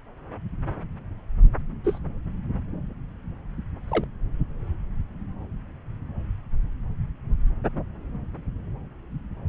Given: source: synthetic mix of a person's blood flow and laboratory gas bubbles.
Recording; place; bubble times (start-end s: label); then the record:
Doppler ultrasound of blood flow; subclavian vein
1.84-1.98 s: bubbles
3.90-4.04 s: bubbles
From the record:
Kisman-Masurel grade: 121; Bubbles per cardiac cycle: 1 to 2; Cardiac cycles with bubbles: 10 to 50%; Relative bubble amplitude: barely perceptible (0.100 to 0.250); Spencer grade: 2 (many but less than half of the cardiac periods contain bubble signals, singularly or in groups); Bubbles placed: anywhere in the cardiac cycle